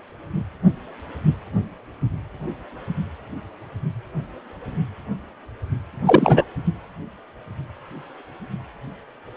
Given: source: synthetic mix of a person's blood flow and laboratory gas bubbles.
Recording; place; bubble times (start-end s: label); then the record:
Doppler ultrasound of blood flow; precordium
6.05-6.45 s: bubbles
From the record:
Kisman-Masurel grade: 213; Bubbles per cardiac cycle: several, 3 to 8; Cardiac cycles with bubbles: 1 to 10%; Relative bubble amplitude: loud (0.450 to 0.775); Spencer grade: 1 (occasional bubble signal discernible with the cardiac motion signal, with majority of cardiac periods free of bubbles); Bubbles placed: only in the low amplitude regions of the cardiac cycle